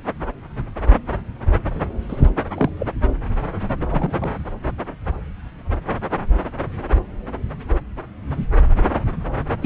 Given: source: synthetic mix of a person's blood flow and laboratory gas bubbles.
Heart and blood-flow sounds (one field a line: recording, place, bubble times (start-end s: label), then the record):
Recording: Doppler ultrasound of blood flow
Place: subclavian vein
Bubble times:
2.08-2.30 s: bubbles
2.57-2.70 s: bubbles
2.79-2.87 s: bubbles
3.90-4.31 s: bubbles
9.62-9.66 s: bubbles
From the record:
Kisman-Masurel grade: 122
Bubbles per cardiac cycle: 1 to 2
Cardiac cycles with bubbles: 10 to 50%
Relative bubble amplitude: moderate (0.250 to 0.450)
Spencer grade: 2 (many but less than half of the cardiac periods contain bubble signals, singularly or in groups)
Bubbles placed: anywhere in the cardiac cycle